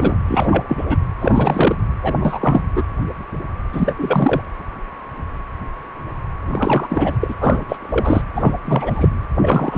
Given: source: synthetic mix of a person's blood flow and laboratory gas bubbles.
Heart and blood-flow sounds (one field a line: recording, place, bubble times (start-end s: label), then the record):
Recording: Doppler ultrasound of blood flow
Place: precordium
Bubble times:
0.00-0.18 s: bubbles
0.28-0.97 s: bubbles
1.20-1.76 s: bubbles
2.02-2.14 s: bubbles
2.20-2.62 s: bubbles
2.76-2.83 s: bubbles
3.72-3.93 s: bubbles
3.97-4.42 s: bubbles
6.46-7.17 s: bubbles
7.21-7.34 s: bubbles
7.40-7.65 s: bubbles
7.69-7.76 s: bubbles
7.80-8.21 s: bubbles
8.35-8.54 s: bubbles
8.65-9.09 s: bubbles
9.41-9.78 s: bubbles
From the record:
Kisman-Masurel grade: 333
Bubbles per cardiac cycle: rolling drumbeat, 9 or more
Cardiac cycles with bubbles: 50 to 99%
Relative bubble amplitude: loud (0.450 to 0.775)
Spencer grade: 3 (all of the cardiac periods contain showers or single bubble signals, but not dominating or overriding the cardiac motion signals)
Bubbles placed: anywhere in the cardiac cycle